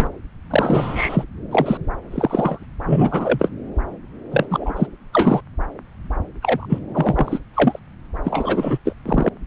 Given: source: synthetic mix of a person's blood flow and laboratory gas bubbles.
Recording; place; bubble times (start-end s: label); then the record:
Doppler ultrasound of blood flow; subclavian vein
0.00-0.09 s: bubbles
0.50-1.23 s: bubbles
1.51-1.78 s: bubbles
2.10-2.65 s: bubbles
2.85-3.50 s: bubbles
4.31-4.46 s: bubbles
4.50-4.87 s: bubbles
5.13-5.40 s: bubbles
6.42-6.67 s: bubbles
6.69-6.79 s: bubbles
6.93-7.39 s: bubbles
7.54-7.79 s: bubbles
8.23-8.78 s: bubbles
8.85-8.92 s: bubbles
9.05-9.29 s: bubbles
From the record:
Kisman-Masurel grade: 243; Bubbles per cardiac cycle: several, 3 to 8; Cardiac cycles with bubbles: 100%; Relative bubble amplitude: loud (0.450 to 0.775); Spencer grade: 3 (all of the cardiac periods contain showers or single bubble signals, but not dominating or overriding the cardiac motion signals); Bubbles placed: anywhere in the cardiac cycle